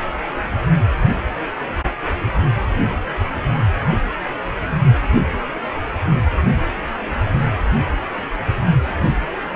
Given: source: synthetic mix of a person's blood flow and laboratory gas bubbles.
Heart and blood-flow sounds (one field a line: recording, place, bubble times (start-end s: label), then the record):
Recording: Doppler ultrasound of blood flow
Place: precordium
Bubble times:
no bubbles
From the record:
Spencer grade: 0 (complete lack of bubble signals)